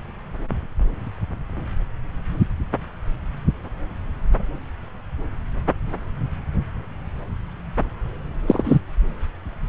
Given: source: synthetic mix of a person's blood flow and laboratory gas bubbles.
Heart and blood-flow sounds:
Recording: Doppler ultrasound of blood flow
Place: subclavian vein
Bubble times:
8.48-8.79 s: bubbles
From the record:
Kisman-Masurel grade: 123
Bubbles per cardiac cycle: 1 to 2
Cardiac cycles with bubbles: 10 to 50%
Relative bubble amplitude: loud (0.450 to 0.775)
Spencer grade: 2 (many but less than half of the cardiac periods contain bubble signals, singularly or in groups)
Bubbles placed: anywhere in the cardiac cycle

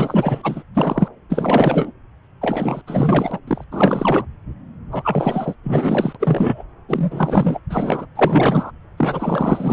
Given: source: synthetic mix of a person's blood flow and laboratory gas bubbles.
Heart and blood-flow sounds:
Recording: Doppler ultrasound of blood flow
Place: subclavian vein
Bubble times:
0.00-0.63 s: bubbles
0.74-1.08 s: bubbles
1.30-1.91 s: bubbles
2.41-2.81 s: bubbles
2.87-3.40 s: bubbles
3.47-3.65 s: bubbles
3.71-4.25 s: bubbles
4.92-5.55 s: bubbles
5.63-6.63 s: bubbles
6.88-7.60 s: bubbles
7.69-8.06 s: bubbles
8.15-8.71 s: bubbles
8.97-9.73 s: bubbles
From the record:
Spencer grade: 4 (maximum detectable bubble signal sounding continuously throughout systole and diastole of every cardiac period, and overriding the amplitude of the normal cardiac signals)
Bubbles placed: anywhere in the cardiac cycle

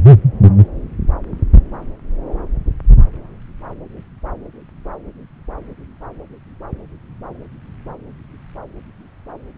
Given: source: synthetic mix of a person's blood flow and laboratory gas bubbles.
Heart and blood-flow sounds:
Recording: Doppler ultrasound of blood flow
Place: subclavian vein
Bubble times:
no bubbles
From the record:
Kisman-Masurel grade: 000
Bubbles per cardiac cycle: 0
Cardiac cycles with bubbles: 0%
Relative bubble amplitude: no bubbles discernible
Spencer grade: 0 (complete lack of bubble signals)

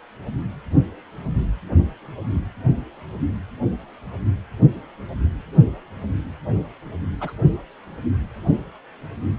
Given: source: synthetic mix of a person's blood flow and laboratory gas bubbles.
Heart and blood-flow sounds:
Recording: Doppler ultrasound of blood flow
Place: precordium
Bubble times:
7.21-7.34 s: bubbles
From the record:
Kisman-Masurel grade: 121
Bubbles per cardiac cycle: 1 to 2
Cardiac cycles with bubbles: 10 to 50%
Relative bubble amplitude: barely perceptible (0.100 to 0.250)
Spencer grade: 2 (many but less than half of the cardiac periods contain bubble signals, singularly or in groups)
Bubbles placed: only in the low amplitude regions of the cardiac cycle

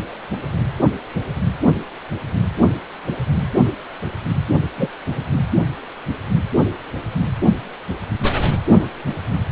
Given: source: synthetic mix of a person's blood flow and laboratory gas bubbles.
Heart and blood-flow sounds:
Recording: Doppler ultrasound of blood flow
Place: precordium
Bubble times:
4.78-4.88 s: bubbles
5.07-5.23 s: bubbles
From the record:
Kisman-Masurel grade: 213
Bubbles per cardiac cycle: several, 3 to 8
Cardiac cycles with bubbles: 1 to 10%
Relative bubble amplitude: loud (0.450 to 0.775)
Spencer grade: 1 (occasional bubble signal discernible with the cardiac motion signal, with majority of cardiac periods free of bubbles)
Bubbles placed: anywhere in the cardiac cycle

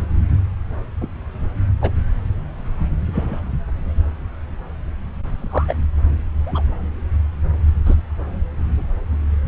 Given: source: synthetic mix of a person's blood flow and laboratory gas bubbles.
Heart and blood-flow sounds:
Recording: Doppler ultrasound of blood flow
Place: subclavian vein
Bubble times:
1.01-1.08 s: bubbles
1.81-1.91 s: bubbles
3.13-3.41 s: bubbles
5.38-5.74 s: bubbles
6.46-6.62 s: bubbles
7.85-7.95 s: bubbles
From the record:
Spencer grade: 2 (many but less than half of the cardiac periods contain bubble signals, singularly or in groups)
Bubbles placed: anywhere in the cardiac cycle

